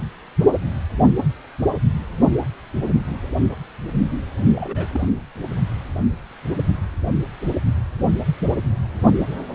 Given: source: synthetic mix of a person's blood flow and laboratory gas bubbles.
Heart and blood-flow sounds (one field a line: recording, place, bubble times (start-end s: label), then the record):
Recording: Doppler ultrasound of blood flow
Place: precordium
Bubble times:
4.38-4.45 s: bubbles
4.55-4.88 s: bubbles
4.92-5.08 s: bubbles
From the record:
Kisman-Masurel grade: 211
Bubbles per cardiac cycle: several, 3 to 8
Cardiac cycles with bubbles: 1 to 10%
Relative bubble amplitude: barely perceptible (0.100 to 0.250)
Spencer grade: 1 (occasional bubble signal discernible with the cardiac motion signal, with majority of cardiac periods free of bubbles)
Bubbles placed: anywhere in the cardiac cycle